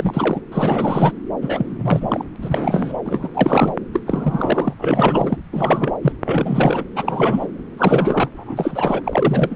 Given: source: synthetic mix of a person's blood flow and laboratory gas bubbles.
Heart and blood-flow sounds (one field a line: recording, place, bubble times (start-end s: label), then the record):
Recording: Doppler ultrasound of blood flow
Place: subclavian vein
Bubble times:
0.00-0.40 s: bubbles
0.52-1.13 s: bubbles
1.42-2.24 s: bubbles
2.42-2.98 s: bubbles
3.05-3.29 s: bubbles
3.34-3.72 s: bubbles
3.93-4.00 s: bubbles
4.07-4.74 s: bubbles
4.78-5.37 s: bubbles
5.52-5.96 s: bubbles
6.03-6.12 s: bubbles
6.25-6.84 s: bubbles
6.96-7.47 s: bubbles
7.77-8.29 s: bubbles
8.37-9.01 s: bubbles
9.04-9.56 s: bubbles
From the record:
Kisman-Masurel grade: 342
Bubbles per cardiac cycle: rolling drumbeat, 9 or more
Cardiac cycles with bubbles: 100%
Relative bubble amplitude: moderate (0.250 to 0.450)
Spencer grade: 3 (all of the cardiac periods contain showers or single bubble signals, but not dominating or overriding the cardiac motion signals)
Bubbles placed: anywhere in the cardiac cycle